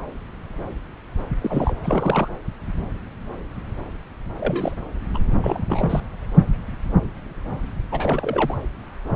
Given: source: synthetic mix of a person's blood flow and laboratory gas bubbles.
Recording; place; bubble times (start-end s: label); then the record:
Doppler ultrasound of blood flow; subclavian vein
1.41-1.75 s: bubbles
1.83-2.28 s: bubbles
4.38-4.76 s: bubbles
5.14-5.18 s: bubbles
5.35-5.63 s: bubbles
5.69-6.01 s: bubbles
7.91-8.57 s: bubbles
From the record:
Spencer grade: 2 (many but less than half of the cardiac periods contain bubble signals, singularly or in groups); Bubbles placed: anywhere in the cardiac cycle